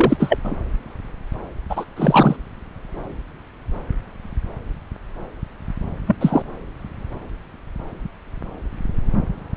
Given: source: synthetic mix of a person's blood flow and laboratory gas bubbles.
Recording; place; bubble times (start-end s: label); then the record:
Doppler ultrasound of blood flow; subclavian vein
0.00-0.17 s: bubbles
0.20-0.38 s: bubbles
0.43-0.56 s: bubbles
1.70-1.85 s: bubbles
1.96-2.36 s: bubbles
6.07-6.16 s: bubbles
6.21-6.43 s: bubbles
From the record:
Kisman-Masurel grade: 223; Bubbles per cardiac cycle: several, 3 to 8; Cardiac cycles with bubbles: 10 to 50%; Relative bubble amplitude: loud (0.450 to 0.775); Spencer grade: 2 (many but less than half of the cardiac periods contain bubble signals, singularly or in groups); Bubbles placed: anywhere in the cardiac cycle